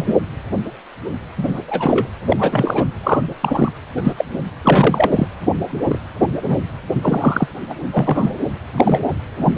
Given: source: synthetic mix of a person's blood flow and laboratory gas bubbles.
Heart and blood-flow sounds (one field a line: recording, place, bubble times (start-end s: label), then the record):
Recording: Doppler ultrasound of blood flow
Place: precordium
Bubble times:
0.00-0.15 s: bubbles
1.37-1.59 s: bubbles
1.67-2.08 s: bubbles
2.29-2.85 s: bubbles
3.03-3.20 s: bubbles
3.41-3.70 s: bubbles
3.96-4.12 s: bubbles
4.17-4.25 s: bubbles
4.64-5.28 s: bubbles
5.70-6.00 s: bubbles
6.21-6.28 s: bubbles
6.44-6.58 s: bubbles
7.02-7.48 s: bubbles
7.69-7.74 s: bubbles
7.91-8.35 s: bubbles
8.76-9.01 s: bubbles
9.39-9.55 s: bubbles
From the record:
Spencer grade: 3 (all of the cardiac periods contain showers or single bubble signals, but not dominating or overriding the cardiac motion signals)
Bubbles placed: anywhere in the cardiac cycle